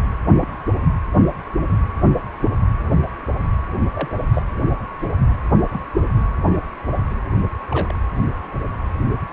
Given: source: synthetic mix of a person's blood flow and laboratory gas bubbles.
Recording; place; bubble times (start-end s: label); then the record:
Doppler ultrasound of blood flow; precordium
0.36-0.65 s: bubbles
3.94-4.15 s: bubbles
4.33-4.42 s: bubbles
5.68-5.83 s: bubbles
6.17-6.21 s: bubbles
7.69-7.97 s: bubbles
From the record:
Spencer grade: 2 (many but less than half of the cardiac periods contain bubble signals, singularly or in groups); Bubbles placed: anywhere in the cardiac cycle